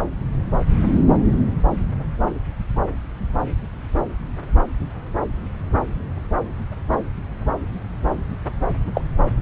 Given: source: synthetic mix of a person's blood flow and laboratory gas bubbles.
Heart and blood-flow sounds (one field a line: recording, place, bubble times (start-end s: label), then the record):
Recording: Doppler ultrasound of blood flow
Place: subclavian vein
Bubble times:
8.94-9.01 s: bubbles
From the record:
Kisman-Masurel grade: 112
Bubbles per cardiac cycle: 1 to 2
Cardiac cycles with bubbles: 1 to 10%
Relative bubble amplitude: moderate (0.250 to 0.450)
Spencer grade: 1 (occasional bubble signal discernible with the cardiac motion signal, with majority of cardiac periods free of bubbles)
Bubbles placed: anywhere in the cardiac cycle